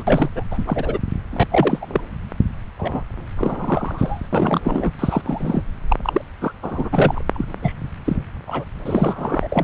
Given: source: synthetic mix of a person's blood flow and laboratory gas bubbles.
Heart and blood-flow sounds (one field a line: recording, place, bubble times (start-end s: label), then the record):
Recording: Doppler ultrasound of blood flow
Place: subclavian vein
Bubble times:
0.00-0.04 s: bubbles
0.07-0.29 s: bubbles
0.36-0.43 s: bubbles
0.51-0.64 s: bubbles
0.67-0.98 s: bubbles
1.31-1.46 s: bubbles
1.50-1.78 s: bubbles
1.81-2.01 s: bubbles
2.78-3.03 s: bubbles
3.38-4.28 s: bubbles
4.33-4.92 s: bubbles
4.99-5.21 s: bubbles
5.24-5.62 s: bubbles
5.89-5.96 s: bubbles
6.04-6.21 s: bubbles
6.41-6.52 s: bubbles
6.62-6.89 s: bubbles
6.92-7.21 s: bubbles
7.33-7.45 s: bubbles
7.62-7.75 s: bubbles
8.04-8.17 s: bubbles
8.47-8.64 s: bubbles
8.85-9.47 s: bubbles
9.50-9.63 s: bubbles
From the record:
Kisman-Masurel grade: 242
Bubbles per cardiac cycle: several, 3 to 8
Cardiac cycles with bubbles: 100%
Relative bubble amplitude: moderate (0.250 to 0.450)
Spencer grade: 3 (all of the cardiac periods contain showers or single bubble signals, but not dominating or overriding the cardiac motion signals)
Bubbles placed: anywhere in the cardiac cycle